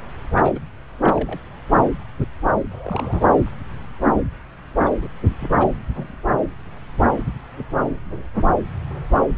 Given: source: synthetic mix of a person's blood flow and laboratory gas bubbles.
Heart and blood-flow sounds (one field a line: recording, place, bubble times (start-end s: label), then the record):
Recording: Doppler ultrasound of blood flow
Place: subclavian vein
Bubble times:
0.35-0.59 s: bubbles
1.04-1.41 s: bubbles
2.71-3.27 s: bubbles
4.85-4.89 s: bubbles
5.01-5.07 s: bubbles
5.40-5.49 s: bubbles
5.59-5.66 s: bubbles
5.94-6.14 s: bubbles
From the record:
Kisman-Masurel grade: 221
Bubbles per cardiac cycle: several, 3 to 8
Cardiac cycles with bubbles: 10 to 50%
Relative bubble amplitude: barely perceptible (0.100 to 0.250)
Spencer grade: 2 (many but less than half of the cardiac periods contain bubble signals, singularly or in groups)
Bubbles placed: anywhere in the cardiac cycle